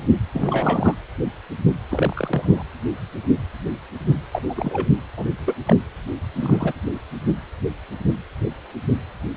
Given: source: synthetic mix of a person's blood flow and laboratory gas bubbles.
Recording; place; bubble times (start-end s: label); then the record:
Doppler ultrasound of blood flow; precordium
0.00-0.05 s: bubbles
0.33-0.95 s: bubbles
1.91-2.64 s: bubbles
4.32-4.41 s: bubbles
4.49-4.90 s: bubbles
5.17-5.25 s: bubbles
5.40-5.55 s: bubbles
5.67-5.76 s: bubbles
6.40-6.73 s: bubbles
From the record:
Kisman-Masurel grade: 232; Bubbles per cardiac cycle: several, 3 to 8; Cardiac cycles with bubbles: 50 to 99%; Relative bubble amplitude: moderate (0.250 to 0.450); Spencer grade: 3 (all of the cardiac periods contain showers or single bubble signals, but not dominating or overriding the cardiac motion signals); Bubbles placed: anywhere in the cardiac cycle